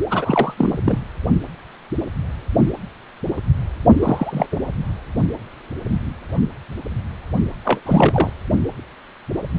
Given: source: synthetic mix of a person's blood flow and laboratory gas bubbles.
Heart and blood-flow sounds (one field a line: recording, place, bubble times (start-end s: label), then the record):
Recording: Doppler ultrasound of blood flow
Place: precordium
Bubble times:
0.10-0.54 s: bubbles
0.57-0.77 s: bubbles
0.84-0.98 s: bubbles
4.02-4.46 s: bubbles
4.51-4.58 s: bubbles
7.64-7.80 s: bubbles
7.85-8.30 s: bubbles
From the record:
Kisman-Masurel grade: 222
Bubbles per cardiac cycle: several, 3 to 8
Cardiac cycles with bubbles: 10 to 50%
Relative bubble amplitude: moderate (0.250 to 0.450)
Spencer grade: 2 (many but less than half of the cardiac periods contain bubble signals, singularly or in groups)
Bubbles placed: only in the low amplitude regions of the cardiac cycle